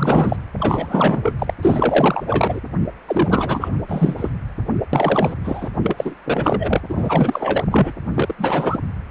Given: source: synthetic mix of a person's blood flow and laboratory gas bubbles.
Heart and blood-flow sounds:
Doppler ultrasound of blood flow; precordium
0.00-0.36 s: bubbles
0.57-1.34 s: bubbles
1.39-1.54 s: bubbles
1.63-2.23 s: bubbles
2.27-2.61 s: bubbles
3.07-3.69 s: bubbles
3.88-4.30 s: bubbles
4.93-5.34 s: bubbles
5.43-5.71 s: bubbles
5.83-6.14 s: bubbles
6.25-6.80 s: bubbles
6.88-7.65 s: bubbles
7.71-7.92 s: bubbles
8.14-8.35 s: bubbles
8.38-8.79 s: bubbles
From the record:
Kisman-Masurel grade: 444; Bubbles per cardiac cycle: continuous sound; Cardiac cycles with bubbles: 100%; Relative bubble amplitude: maximal (0.775 to 0.999); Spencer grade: 4 (maximum detectable bubble signal sounding continuously throughout systole and diastole of every cardiac period, and overriding the amplitude of the normal cardiac signals); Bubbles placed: anywhere in the cardiac cycle

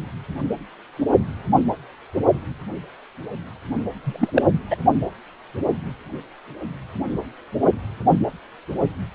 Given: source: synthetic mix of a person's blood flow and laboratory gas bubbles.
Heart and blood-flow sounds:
Doppler ultrasound of blood flow; precordium
4.04-4.31 s: bubbles
4.34-4.43 s: bubbles
4.70-4.76 s: bubbles
From the record:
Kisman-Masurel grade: 213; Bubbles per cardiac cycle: several, 3 to 8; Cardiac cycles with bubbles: 1 to 10%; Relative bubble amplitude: loud (0.450 to 0.775); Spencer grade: 1 (occasional bubble signal discernible with the cardiac motion signal, with majority of cardiac periods free of bubbles); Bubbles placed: only in the low amplitude regions of the cardiac cycle

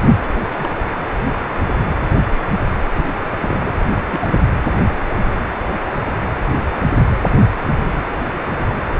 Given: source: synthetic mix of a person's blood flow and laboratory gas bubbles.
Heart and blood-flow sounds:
Doppler ultrasound of blood flow; precordium
0.38-0.42 s: bubbles
0.57-0.80 s: bubbles
2.94-3.13 s: bubbles
3.40-3.75 s: bubbles
4.05-4.47 s: bubbles
From the record:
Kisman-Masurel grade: 221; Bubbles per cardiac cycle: several, 3 to 8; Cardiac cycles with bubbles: 10 to 50%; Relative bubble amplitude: barely perceptible (0.100 to 0.250); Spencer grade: 2 (many but less than half of the cardiac periods contain bubble signals, singularly or in groups); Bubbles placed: anywhere in the cardiac cycle

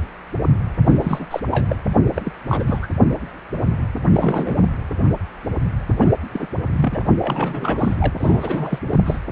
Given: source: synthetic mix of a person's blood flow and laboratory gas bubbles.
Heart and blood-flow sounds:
Doppler ultrasound of blood flow; precordium
0.85-1.26 s: bubbles
1.30-1.40 s: bubbles
1.51-1.76 s: bubbles
2.15-2.21 s: bubbles
2.24-2.32 s: bubbles
2.47-2.79 s: bubbles
2.82-2.87 s: bubbles
4.13-4.67 s: bubbles
6.00-6.14 s: bubbles
6.33-6.47 s: bubbles
6.73-7.04 s: bubbles
7.21-7.95 s: bubbles
8.00-8.13 s: bubbles
8.18-8.79 s: bubbles
8.90-9.01 s: bubbles
9.05-9.21 s: bubbles
From the record:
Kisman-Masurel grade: 332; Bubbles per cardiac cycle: rolling drumbeat, 9 or more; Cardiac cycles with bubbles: 50 to 99%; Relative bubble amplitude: moderate (0.250 to 0.450); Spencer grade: 3 (all of the cardiac periods contain showers or single bubble signals, but not dominating or overriding the cardiac motion signals); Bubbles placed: anywhere in the cardiac cycle

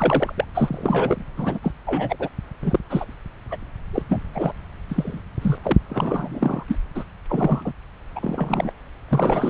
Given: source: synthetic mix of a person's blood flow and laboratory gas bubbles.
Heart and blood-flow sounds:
Doppler ultrasound of blood flow; subclavian vein
0.00-0.32 s: bubbles
0.37-0.45 s: bubbles
0.54-1.25 s: bubbles
1.36-1.59 s: bubbles
1.62-1.74 s: bubbles
1.86-2.16 s: bubbles
2.19-2.29 s: bubbles
2.63-2.79 s: bubbles
2.89-3.05 s: bubbles
3.50-3.57 s: bubbles
3.92-4.02 s: bubbles
4.08-4.22 s: bubbles
4.33-4.52 s: bubbles
4.89-5.21 s: bubbles
5.42-5.58 s: bubbles
5.62-5.79 s: bubbles
5.89-6.64 s: bubbles
6.68-6.76 s: bubbles
6.94-7.04 s: bubbles
7.29-7.73 s: bubbles
8.15-8.71 s: bubbles
9.08-9.49 s: bubbles
From the record:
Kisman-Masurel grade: 243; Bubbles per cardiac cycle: several, 3 to 8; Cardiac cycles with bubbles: 100%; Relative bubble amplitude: loud (0.450 to 0.775); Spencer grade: 3 (all of the cardiac periods contain showers or single bubble signals, but not dominating or overriding the cardiac motion signals); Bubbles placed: anywhere in the cardiac cycle

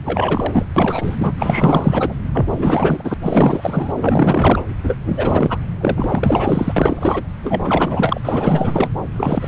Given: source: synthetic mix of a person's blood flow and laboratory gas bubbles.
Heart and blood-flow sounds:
Doppler ultrasound of blood flow; subclavian vein
0.04-0.67 s: bubbles
0.76-1.33 s: bubbles
1.39-2.15 s: bubbles
2.32-3.14 s: bubbles
3.23-4.65 s: bubbles
4.83-4.96 s: bubbles
5.04-5.58 s: bubbles
5.79-6.73 s: bubbles
6.76-7.22 s: bubbles
7.43-8.21 s: bubbles
8.24-8.89 s: bubbles
9.16-9.48 s: bubbles
From the record:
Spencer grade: 4 (maximum detectable bubble signal sounding continuously throughout systole and diastole of every cardiac period, and overriding the amplitude of the normal cardiac signals); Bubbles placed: anywhere in the cardiac cycle

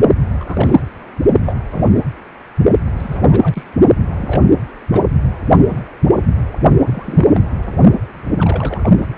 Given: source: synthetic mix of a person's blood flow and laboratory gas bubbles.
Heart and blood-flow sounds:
Doppler ultrasound of blood flow; precordium
0.40-0.44 s: bubbles
0.47-0.83 s: bubbles
1.43-1.54 s: bubbles
1.71-1.98 s: bubbles
2.97-3.63 s: bubbles
4.10-4.49 s: bubbles
4.92-5.02 s: bubbles
5.59-5.81 s: bubbles
6.17-6.27 s: bubbles
6.87-7.41 s: bubbles
7.66-7.73 s: bubbles
8.37-8.94 s: bubbles
9.02-9.07 s: bubbles
From the record:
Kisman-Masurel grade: 242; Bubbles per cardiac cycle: several, 3 to 8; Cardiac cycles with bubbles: 100%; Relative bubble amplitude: moderate (0.250 to 0.450); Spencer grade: 3 (all of the cardiac periods contain showers or single bubble signals, but not dominating or overriding the cardiac motion signals); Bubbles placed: only in the low amplitude regions of the cardiac cycle

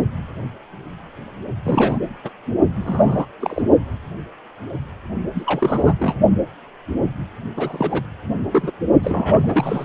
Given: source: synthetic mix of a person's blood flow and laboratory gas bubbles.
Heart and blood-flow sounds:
Doppler ultrasound of blood flow; precordium
1.64-1.98 s: bubbles
2.24-2.30 s: bubbles
2.75-3.26 s: bubbles
3.40-3.62 s: bubbles
5.35-5.95 s: bubbles
5.99-6.15 s: bubbles
7.57-8.04 s: bubbles
8.53-8.71 s: bubbles
9.03-9.85 s: bubbles
From the record:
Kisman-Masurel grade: 232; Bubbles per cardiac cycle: several, 3 to 8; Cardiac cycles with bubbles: 50 to 99%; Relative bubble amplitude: moderate (0.250 to 0.450); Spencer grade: 3 (all of the cardiac periods contain showers or single bubble signals, but not dominating or overriding the cardiac motion signals); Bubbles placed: only in the low amplitude regions of the cardiac cycle

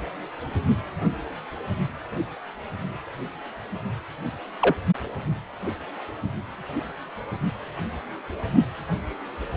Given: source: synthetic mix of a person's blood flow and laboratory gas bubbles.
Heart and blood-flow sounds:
Doppler ultrasound of blood flow; precordium
4.60-4.75 s: bubbles
From the record:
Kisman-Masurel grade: 112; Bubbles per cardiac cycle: 1 to 2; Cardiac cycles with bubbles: 1 to 10%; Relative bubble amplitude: moderate (0.250 to 0.450); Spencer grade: 1 (occasional bubble signal discernible with the cardiac motion signal, with majority of cardiac periods free of bubbles); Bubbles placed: only in the low amplitude regions of the cardiac cycle

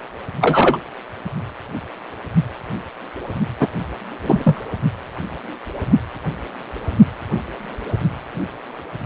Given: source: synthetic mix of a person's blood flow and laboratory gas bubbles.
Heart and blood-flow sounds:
Doppler ultrasound of blood flow; precordium
0.40-0.78 s: bubbles
3.60-3.68 s: bubbles
4.23-4.61 s: bubbles
From the record:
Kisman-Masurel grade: 123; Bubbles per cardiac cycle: 1 to 2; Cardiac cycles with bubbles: 10 to 50%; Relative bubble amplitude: loud (0.450 to 0.775); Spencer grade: 2 (many but less than half of the cardiac periods contain bubble signals, singularly or in groups); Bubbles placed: only in the low amplitude regions of the cardiac cycle

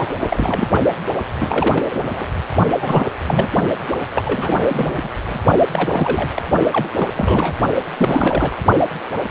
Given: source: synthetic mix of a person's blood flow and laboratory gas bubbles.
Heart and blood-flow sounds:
Doppler ultrasound of blood flow; precordium
0.00-0.15 s: bubbles
0.21-0.68 s: bubbles
1.38-1.84 s: bubbles
1.91-2.25 s: bubbles
2.82-3.07 s: bubbles
3.26-3.48 s: bubbles
3.86-3.91 s: bubbles
4.15-5.00 s: bubbles
5.03-5.09 s: bubbles
5.27-5.40 s: bubbles
5.71-6.29 s: bubbles
6.34-6.42 s: bubbles
6.73-6.88 s: bubbles
6.95-7.07 s: bubbles
7.17-7.54 s: bubbles
7.97-8.59 s: bubbles
From the record:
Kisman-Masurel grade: 332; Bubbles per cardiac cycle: rolling drumbeat, 9 or more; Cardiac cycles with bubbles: 50 to 99%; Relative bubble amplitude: moderate (0.250 to 0.450); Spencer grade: 3 (all of the cardiac periods contain showers or single bubble signals, but not dominating or overriding the cardiac motion signals); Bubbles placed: only in the low amplitude regions of the cardiac cycle

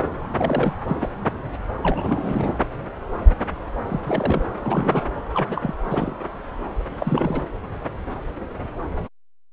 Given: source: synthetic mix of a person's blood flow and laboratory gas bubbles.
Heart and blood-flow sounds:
Doppler ultrasound of blood flow; subclavian vein
0.34-0.75 s: bubbles
0.88-0.96 s: bubbles
1.00-1.11 s: bubbles
1.82-2.57 s: bubbles
3.87-4.42 s: bubbles
4.50-5.03 s: bubbles
5.33-5.74 s: bubbles
5.84-6.16 s: bubbles
7.00-7.43 s: bubbles
From the record:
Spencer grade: 3 (all of the cardiac periods contain showers or single bubble signals, but not dominating or overriding the cardiac motion signals); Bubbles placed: anywhere in the cardiac cycle

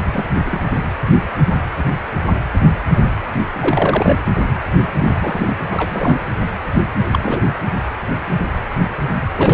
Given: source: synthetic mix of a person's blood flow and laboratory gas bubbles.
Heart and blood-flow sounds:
Doppler ultrasound of blood flow; precordium
0.13-0.27 s: bubbles
0.45-0.64 s: bubbles
3.60-4.18 s: bubbles
4.96-5.55 s: bubbles
5.70-6.17 s: bubbles
7.09-7.40 s: bubbles
9.37-9.54 s: bubbles
From the record:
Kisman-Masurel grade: 222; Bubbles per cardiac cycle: several, 3 to 8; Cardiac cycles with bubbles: 10 to 50%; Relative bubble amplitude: moderate (0.250 to 0.450); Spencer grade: 2 (many but less than half of the cardiac periods contain bubble signals, singularly or in groups); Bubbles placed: anywhere in the cardiac cycle

